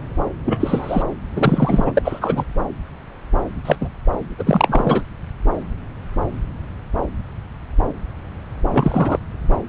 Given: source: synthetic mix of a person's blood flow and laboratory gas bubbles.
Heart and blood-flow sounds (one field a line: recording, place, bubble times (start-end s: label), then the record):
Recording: Doppler ultrasound of blood flow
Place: subclavian vein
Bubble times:
0.45-1.03 s: bubbles
1.35-2.02 s: bubbles
2.05-2.44 s: bubbles
3.65-3.76 s: bubbles
3.81-3.89 s: bubbles
4.38-5.02 s: bubbles
8.71-9.18 s: bubbles
From the record:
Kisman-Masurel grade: 223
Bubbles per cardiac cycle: several, 3 to 8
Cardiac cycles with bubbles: 10 to 50%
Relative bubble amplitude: loud (0.450 to 0.775)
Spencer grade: 2 (many but less than half of the cardiac periods contain bubble signals, singularly or in groups)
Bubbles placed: anywhere in the cardiac cycle